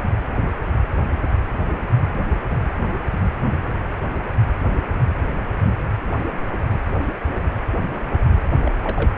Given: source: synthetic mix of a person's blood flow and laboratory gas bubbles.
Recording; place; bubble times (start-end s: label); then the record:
Doppler ultrasound of blood flow; precordium
8.65-8.72 s: bubbles
8.84-9.13 s: bubbles
From the record:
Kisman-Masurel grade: 211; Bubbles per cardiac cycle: several, 3 to 8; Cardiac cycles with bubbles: 1 to 10%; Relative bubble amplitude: barely perceptible (0.100 to 0.250); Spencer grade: 1 (occasional bubble signal discernible with the cardiac motion signal, with majority of cardiac periods free of bubbles); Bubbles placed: only in the low amplitude regions of the cardiac cycle